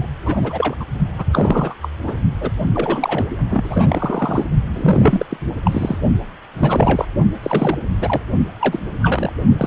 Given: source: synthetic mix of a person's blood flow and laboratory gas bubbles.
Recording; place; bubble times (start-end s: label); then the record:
Doppler ultrasound of blood flow; precordium
0.00-0.05 s: bubbles
0.25-0.76 s: bubbles
0.79-0.85 s: bubbles
1.18-1.24 s: bubbles
1.32-1.75 s: bubbles
1.82-1.89 s: bubbles
2.06-2.21 s: bubbles
2.40-2.50 s: bubbles
2.73-3.25 s: bubbles
3.50-4.47 s: bubbles
4.72-5.25 s: bubbles
5.30-5.37 s: bubbles
5.64-5.98 s: bubbles
6.58-7.05 s: bubbles
7.42-7.78 s: bubbles
8.00-8.21 s: bubbles
8.61-8.79 s: bubbles
9.02-9.31 s: bubbles
9.50-9.67 s: bubbles
From the record:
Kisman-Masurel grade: 342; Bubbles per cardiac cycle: rolling drumbeat, 9 or more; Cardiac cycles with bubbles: 100%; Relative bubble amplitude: moderate (0.250 to 0.450); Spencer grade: 3 (all of the cardiac periods contain showers or single bubble signals, but not dominating or overriding the cardiac motion signals); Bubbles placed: only in the low amplitude regions of the cardiac cycle